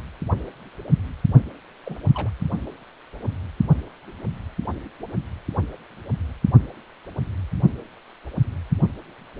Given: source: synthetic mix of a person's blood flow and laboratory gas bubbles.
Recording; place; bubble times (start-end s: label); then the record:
Doppler ultrasound of blood flow; precordium
1.83-1.97 s: bubbles
2.15-2.30 s: bubbles
From the record:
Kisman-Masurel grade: 211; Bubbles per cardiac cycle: several, 3 to 8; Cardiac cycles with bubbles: 1 to 10%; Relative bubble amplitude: barely perceptible (0.100 to 0.250); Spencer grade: 1 (occasional bubble signal discernible with the cardiac motion signal, with majority of cardiac periods free of bubbles); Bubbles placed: only in the low amplitude regions of the cardiac cycle